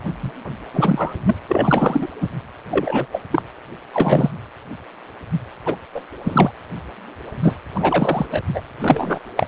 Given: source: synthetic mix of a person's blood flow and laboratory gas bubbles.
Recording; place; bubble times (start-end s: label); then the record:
Doppler ultrasound of blood flow; precordium
0.23-0.32 s: bubbles
0.73-1.14 s: bubbles
1.26-1.36 s: bubbles
1.48-2.08 s: bubbles
2.21-2.27 s: bubbles
2.71-3.06 s: bubbles
3.12-3.23 s: bubbles
3.31-3.42 s: bubbles
3.93-4.30 s: bubbles
5.66-5.76 s: bubbles
5.95-6.01 s: bubbles
6.23-6.51 s: bubbles
7.42-7.56 s: bubbles
7.74-8.26 s: bubbles
8.31-8.41 s: bubbles
8.53-8.62 s: bubbles
8.80-9.19 s: bubbles
9.36-9.46 s: bubbles
From the record:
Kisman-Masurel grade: 233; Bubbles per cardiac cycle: several, 3 to 8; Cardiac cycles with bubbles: 50 to 99%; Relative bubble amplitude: loud (0.450 to 0.775); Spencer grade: 3 (all of the cardiac periods contain showers or single bubble signals, but not dominating or overriding the cardiac motion signals); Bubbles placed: anywhere in the cardiac cycle